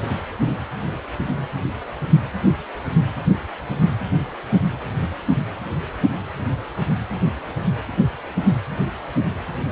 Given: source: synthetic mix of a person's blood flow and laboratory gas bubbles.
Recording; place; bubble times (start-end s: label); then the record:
Doppler ultrasound of blood flow; precordium
no bubbles
From the record:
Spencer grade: 0 (complete lack of bubble signals)